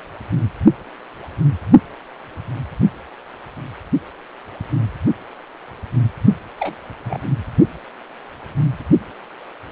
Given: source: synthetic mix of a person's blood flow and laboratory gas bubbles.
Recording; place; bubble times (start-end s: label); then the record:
Doppler ultrasound of blood flow; precordium
6.59-6.76 s: bubbles
7.04-7.18 s: bubbles
From the record:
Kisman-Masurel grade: 112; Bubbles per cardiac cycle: 1 to 2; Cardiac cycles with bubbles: 1 to 10%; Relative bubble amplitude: moderate (0.250 to 0.450); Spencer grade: 1 (occasional bubble signal discernible with the cardiac motion signal, with majority of cardiac periods free of bubbles); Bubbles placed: only in the low amplitude regions of the cardiac cycle